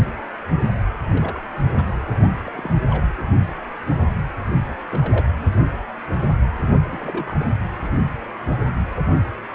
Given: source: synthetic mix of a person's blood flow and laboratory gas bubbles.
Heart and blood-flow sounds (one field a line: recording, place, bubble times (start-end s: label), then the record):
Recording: Doppler ultrasound of blood flow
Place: precordium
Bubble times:
1.09-1.48 s: bubbles
1.75-1.97 s: bubbles
2.11-2.28 s: bubbles
2.44-2.75 s: bubbles
2.90-3.04 s: bubbles
4.67-4.76 s: bubbles
4.90-5.25 s: bubbles
6.63-7.46 s: bubbles
From the record:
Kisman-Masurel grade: 221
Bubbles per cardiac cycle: several, 3 to 8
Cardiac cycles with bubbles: 10 to 50%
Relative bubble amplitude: barely perceptible (0.100 to 0.250)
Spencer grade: 2 (many but less than half of the cardiac periods contain bubble signals, singularly or in groups)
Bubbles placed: anywhere in the cardiac cycle